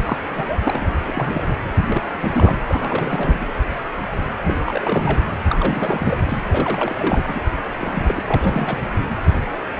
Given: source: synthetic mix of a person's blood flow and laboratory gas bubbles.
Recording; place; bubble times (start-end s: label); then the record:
Doppler ultrasound of blood flow; precordium
0.04-0.17 s: bubbles
0.22-0.58 s: bubbles
0.65-0.91 s: bubbles
1.05-1.44 s: bubbles
1.86-2.10 s: bubbles
2.21-2.58 s: bubbles
2.69-3.48 s: bubbles
4.43-4.55 s: bubbles
4.64-5.21 s: bubbles
5.49-6.18 s: bubbles
6.27-6.38 s: bubbles
6.50-7.23 s: bubbles
7.27-7.40 s: bubbles
7.77-8.25 s: bubbles
8.28-8.83 s: bubbles
From the record:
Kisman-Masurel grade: 332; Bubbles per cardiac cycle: rolling drumbeat, 9 or more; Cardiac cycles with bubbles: 50 to 99%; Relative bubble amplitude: moderate (0.250 to 0.450); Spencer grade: 3 (all of the cardiac periods contain showers or single bubble signals, but not dominating or overriding the cardiac motion signals); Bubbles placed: anywhere in the cardiac cycle